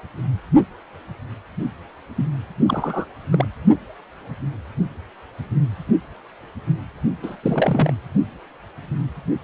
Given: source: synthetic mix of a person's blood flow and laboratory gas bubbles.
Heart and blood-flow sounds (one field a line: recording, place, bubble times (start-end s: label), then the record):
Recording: Doppler ultrasound of blood flow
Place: precordium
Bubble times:
2.15-2.25 s: bubbles
2.66-3.05 s: bubbles
3.30-3.47 s: bubbles
7.22-7.37 s: bubbles
7.42-7.94 s: bubbles
From the record:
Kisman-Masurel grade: 222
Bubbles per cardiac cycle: several, 3 to 8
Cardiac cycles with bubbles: 10 to 50%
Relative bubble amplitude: moderate (0.250 to 0.450)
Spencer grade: 2 (many but less than half of the cardiac periods contain bubble signals, singularly or in groups)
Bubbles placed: only in the low amplitude regions of the cardiac cycle